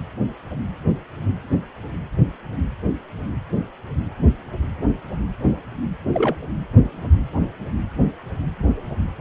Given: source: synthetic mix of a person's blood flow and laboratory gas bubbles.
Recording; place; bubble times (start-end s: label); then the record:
Doppler ultrasound of blood flow; precordium
6.13-6.36 s: bubbles
From the record:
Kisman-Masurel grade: 113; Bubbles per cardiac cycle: 1 to 2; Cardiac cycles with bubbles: 1 to 10%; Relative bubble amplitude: loud (0.450 to 0.775); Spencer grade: 1 (occasional bubble signal discernible with the cardiac motion signal, with majority of cardiac periods free of bubbles); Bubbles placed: anywhere in the cardiac cycle